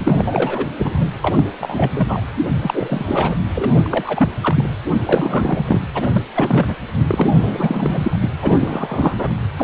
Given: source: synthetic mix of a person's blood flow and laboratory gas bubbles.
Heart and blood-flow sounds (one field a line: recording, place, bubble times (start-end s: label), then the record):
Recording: Doppler ultrasound of blood flow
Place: precordium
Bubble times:
0.00-0.69 s: bubbles
0.78-1.06 s: bubbles
1.21-1.47 s: bubbles
1.60-1.93 s: bubbles
1.95-2.22 s: bubbles
2.60-3.37 s: bubbles
3.54-3.71 s: bubbles
3.75-4.29 s: bubbles
4.40-4.64 s: bubbles
5.05-5.79 s: bubbles
5.94-6.22 s: bubbles
6.34-6.75 s: bubbles
7.08-8.17 s: bubbles
8.21-8.31 s: bubbles
8.41-9.33 s: bubbles
9.56-9.64 s: bubbles
From the record:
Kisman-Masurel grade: 342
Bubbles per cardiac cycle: rolling drumbeat, 9 or more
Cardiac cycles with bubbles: 100%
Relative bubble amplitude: moderate (0.250 to 0.450)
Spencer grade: 3 (all of the cardiac periods contain showers or single bubble signals, but not dominating or overriding the cardiac motion signals)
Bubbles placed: anywhere in the cardiac cycle